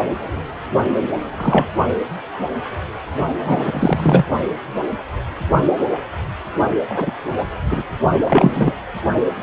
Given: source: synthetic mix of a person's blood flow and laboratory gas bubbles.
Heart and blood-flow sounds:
Doppler ultrasound of blood flow; precordium
1.37-1.67 s: bubbles
3.44-4.25 s: bubbles
6.89-7.12 s: bubbles
7.71-7.83 s: bubbles
8.25-8.73 s: bubbles
From the record:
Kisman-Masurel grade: 223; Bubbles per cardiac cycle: several, 3 to 8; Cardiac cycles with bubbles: 10 to 50%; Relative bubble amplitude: loud (0.450 to 0.775); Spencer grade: 2 (many but less than half of the cardiac periods contain bubble signals, singularly or in groups); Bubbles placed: only in the low amplitude regions of the cardiac cycle

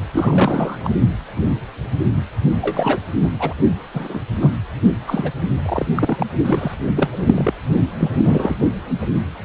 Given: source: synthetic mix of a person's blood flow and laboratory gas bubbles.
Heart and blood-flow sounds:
Doppler ultrasound of blood flow; precordium
0.12-0.94 s: bubbles
2.61-3.01 s: bubbles
3.22-3.30 s: bubbles
3.39-3.55 s: bubbles
3.94-4.24 s: bubbles
4.40-4.50 s: bubbles
5.07-5.31 s: bubbles
5.65-5.86 s: bubbles
5.95-6.27 s: bubbles
6.45-6.75 s: bubbles
6.96-7.24 s: bubbles
7.26-7.53 s: bubbles
7.98-8.10 s: bubbles
8.14-8.57 s: bubbles
From the record:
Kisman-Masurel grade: 232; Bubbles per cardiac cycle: several, 3 to 8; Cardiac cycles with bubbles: 50 to 99%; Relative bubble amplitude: moderate (0.250 to 0.450); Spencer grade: 3 (all of the cardiac periods contain showers or single bubble signals, but not dominating or overriding the cardiac motion signals); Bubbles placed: only in the low amplitude regions of the cardiac cycle

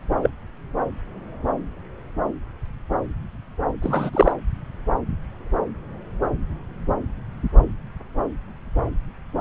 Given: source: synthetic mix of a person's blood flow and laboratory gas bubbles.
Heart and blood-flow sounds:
Doppler ultrasound of blood flow; subclavian vein
0.22-0.30 s: bubbles
3.82-4.10 s: bubbles
4.13-4.32 s: bubbles
From the record:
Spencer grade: 2 (many but less than half of the cardiac periods contain bubble signals, singularly or in groups); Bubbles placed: anywhere in the cardiac cycle

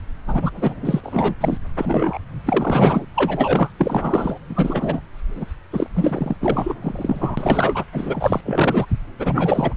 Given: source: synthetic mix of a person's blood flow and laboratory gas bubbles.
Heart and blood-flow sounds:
Doppler ultrasound of blood flow; subclavian vein
0.27-0.51 s: bubbles
0.54-1.01 s: bubbles
1.03-1.34 s: bubbles
1.40-1.57 s: bubbles
1.77-2.19 s: bubbles
2.46-3.06 s: bubbles
3.14-3.71 s: bubbles
3.78-4.38 s: bubbles
4.49-5.01 s: bubbles
5.35-5.45 s: bubbles
5.72-5.87 s: bubbles
5.94-6.36 s: bubbles
6.40-6.74 s: bubbles
6.82-7.84 s: bubbles
7.92-8.40 s: bubbles
8.46-8.86 s: bubbles
9.20-9.74 s: bubbles
From the record:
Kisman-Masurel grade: 343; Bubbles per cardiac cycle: rolling drumbeat, 9 or more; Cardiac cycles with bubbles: 100%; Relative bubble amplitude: loud (0.450 to 0.775); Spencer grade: 3 (all of the cardiac periods contain showers or single bubble signals, but not dominating or overriding the cardiac motion signals); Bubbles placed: anywhere in the cardiac cycle

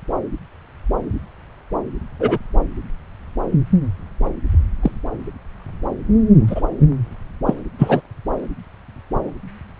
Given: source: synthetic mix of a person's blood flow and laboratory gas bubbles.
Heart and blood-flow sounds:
Doppler ultrasound of blood flow; subclavian vein
2.20-2.38 s: bubbles
4.82-4.92 s: bubbles
6.47-6.61 s: bubbles
7.46-7.54 s: bubbles
7.78-8.01 s: bubbles
From the record:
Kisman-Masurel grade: 123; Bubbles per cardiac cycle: 1 to 2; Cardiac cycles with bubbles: 10 to 50%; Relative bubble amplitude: loud (0.450 to 0.775); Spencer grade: 2 (many but less than half of the cardiac periods contain bubble signals, singularly or in groups); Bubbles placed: anywhere in the cardiac cycle

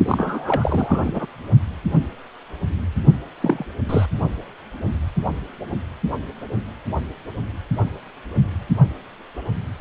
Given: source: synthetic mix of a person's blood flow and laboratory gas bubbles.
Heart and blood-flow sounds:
Doppler ultrasound of blood flow; precordium
0.05-1.25 s: bubbles
3.41-3.65 s: bubbles
3.89-4.06 s: bubbles
From the record:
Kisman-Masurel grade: 222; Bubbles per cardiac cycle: several, 3 to 8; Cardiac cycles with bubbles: 10 to 50%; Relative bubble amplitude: moderate (0.250 to 0.450); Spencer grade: 2 (many but less than half of the cardiac periods contain bubble signals, singularly or in groups); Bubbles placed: only in the low amplitude regions of the cardiac cycle

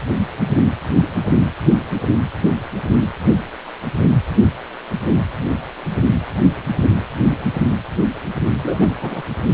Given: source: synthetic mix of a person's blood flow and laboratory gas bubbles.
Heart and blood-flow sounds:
Doppler ultrasound of blood flow; precordium
8.62-8.93 s: bubbles
9.01-9.21 s: bubbles
From the record:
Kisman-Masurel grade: 222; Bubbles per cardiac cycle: several, 3 to 8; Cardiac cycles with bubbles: 10 to 50%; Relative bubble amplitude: moderate (0.250 to 0.450); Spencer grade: 2 (many but less than half of the cardiac periods contain bubble signals, singularly or in groups); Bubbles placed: anywhere in the cardiac cycle

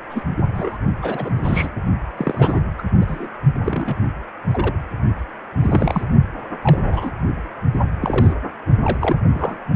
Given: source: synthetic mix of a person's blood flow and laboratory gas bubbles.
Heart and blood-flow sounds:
Doppler ultrasound of blood flow; precordium
0.09-0.23 s: bubbles
0.35-0.78 s: bubbles
1.02-1.69 s: bubbles
2.17-2.60 s: bubbles
2.78-2.83 s: bubbles
3.01-3.05 s: bubbles
3.07-3.28 s: bubbles
3.63-3.95 s: bubbles
4.52-4.74 s: bubbles
5.62-6.05 s: bubbles
6.63-6.79 s: bubbles
6.84-7.12 s: bubbles
7.73-7.79 s: bubbles
8.00-8.34 s: bubbles
8.82-9.17 s: bubbles
9.32-9.58 s: bubbles
From the record:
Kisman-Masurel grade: 242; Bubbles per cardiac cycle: several, 3 to 8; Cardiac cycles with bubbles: 100%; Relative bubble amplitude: moderate (0.250 to 0.450); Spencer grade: 3 (all of the cardiac periods contain showers or single bubble signals, but not dominating or overriding the cardiac motion signals); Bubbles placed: only in the low amplitude regions of the cardiac cycle

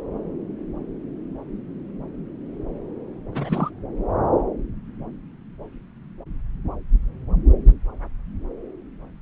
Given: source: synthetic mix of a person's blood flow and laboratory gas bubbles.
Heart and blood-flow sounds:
Doppler ultrasound of blood flow; subclavian vein
3.32-3.70 s: bubbles
From the record:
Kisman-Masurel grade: 211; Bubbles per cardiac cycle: several, 3 to 8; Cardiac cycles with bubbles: 1 to 10%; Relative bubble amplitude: barely perceptible (0.100 to 0.250); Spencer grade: 1 (occasional bubble signal discernible with the cardiac motion signal, with majority of cardiac periods free of bubbles); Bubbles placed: anywhere in the cardiac cycle

